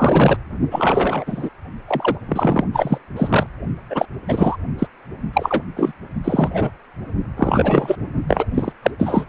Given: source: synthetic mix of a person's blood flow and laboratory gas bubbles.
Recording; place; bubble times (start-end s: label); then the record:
Doppler ultrasound of blood flow; precordium
0.00-0.36 s: bubbles
0.70-1.49 s: bubbles
1.87-2.15 s: bubbles
2.28-2.64 s: bubbles
2.73-2.98 s: bubbles
3.16-3.47 s: bubbles
3.89-4.05 s: bubbles
4.28-4.56 s: bubbles
4.79-4.87 s: bubbles
5.33-5.64 s: bubbles
5.76-5.93 s: bubbles
6.24-6.71 s: bubbles
7.36-7.96 s: bubbles
8.28-8.46 s: bubbles
8.54-8.72 s: bubbles
8.82-8.91 s: bubbles
8.99-9.24 s: bubbles
From the record:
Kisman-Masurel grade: 243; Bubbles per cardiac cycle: several, 3 to 8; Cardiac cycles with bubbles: 100%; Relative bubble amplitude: loud (0.450 to 0.775); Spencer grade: 3 (all of the cardiac periods contain showers or single bubble signals, but not dominating or overriding the cardiac motion signals); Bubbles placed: only in the low amplitude regions of the cardiac cycle